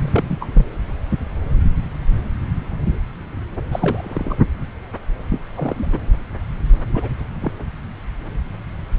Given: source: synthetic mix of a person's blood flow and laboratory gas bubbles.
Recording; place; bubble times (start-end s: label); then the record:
Doppler ultrasound of blood flow; subclavian vein
0.00-0.47 s: bubbles
0.54-0.66 s: bubbles
3.71-4.40 s: bubbles
5.29-5.40 s: bubbles
5.55-5.99 s: bubbles
6.94-7.10 s: bubbles
7.41-7.53 s: bubbles
From the record:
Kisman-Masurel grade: 222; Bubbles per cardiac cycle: several, 3 to 8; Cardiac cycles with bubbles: 10 to 50%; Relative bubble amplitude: moderate (0.250 to 0.450); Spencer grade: 2 (many but less than half of the cardiac periods contain bubble signals, singularly or in groups); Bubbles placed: anywhere in the cardiac cycle